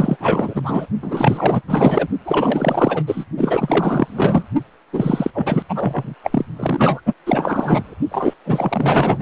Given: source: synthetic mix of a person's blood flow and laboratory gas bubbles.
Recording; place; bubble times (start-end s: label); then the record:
Doppler ultrasound of blood flow; precordium
0.00-0.17 s: bubbles
0.20-0.86 s: bubbles
1.02-1.61 s: bubbles
1.67-2.08 s: bubbles
2.25-3.03 s: bubbles
3.07-3.25 s: bubbles
3.37-4.44 s: bubbles
4.92-5.31 s: bubbles
5.34-5.62 s: bubbles
5.69-6.15 s: bubbles
6.23-6.45 s: bubbles
6.56-7.02 s: bubbles
7.06-7.14 s: bubbles
7.26-7.94 s: bubbles
8.11-8.34 s: bubbles
8.44-9.18 s: bubbles
From the record:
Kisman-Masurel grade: 444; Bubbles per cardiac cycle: continuous sound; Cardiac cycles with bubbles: 100%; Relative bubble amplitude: maximal (0.775 to 0.999); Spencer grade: 4 (maximum detectable bubble signal sounding continuously throughout systole and diastole of every cardiac period, and overriding the amplitude of the normal cardiac signals); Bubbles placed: only in the low amplitude regions of the cardiac cycle